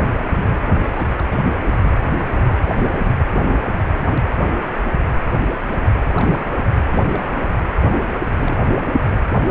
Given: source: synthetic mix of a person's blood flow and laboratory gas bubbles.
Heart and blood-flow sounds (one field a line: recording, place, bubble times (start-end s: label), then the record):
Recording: Doppler ultrasound of blood flow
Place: precordium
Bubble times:
0.84-1.06 s: bubbles
1.10-1.23 s: bubbles
1.30-1.36 s: bubbles
1.50-1.54 s: bubbles
6.16-6.51 s: bubbles
6.54-6.74 s: bubbles
6.92-7.49 s: bubbles
7.79-7.90 s: bubbles
8.24-8.57 s: bubbles
From the record:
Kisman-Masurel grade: 221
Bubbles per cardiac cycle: several, 3 to 8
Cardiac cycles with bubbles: 10 to 50%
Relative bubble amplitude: barely perceptible (0.100 to 0.250)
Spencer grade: 2 (many but less than half of the cardiac periods contain bubble signals, singularly or in groups)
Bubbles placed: anywhere in the cardiac cycle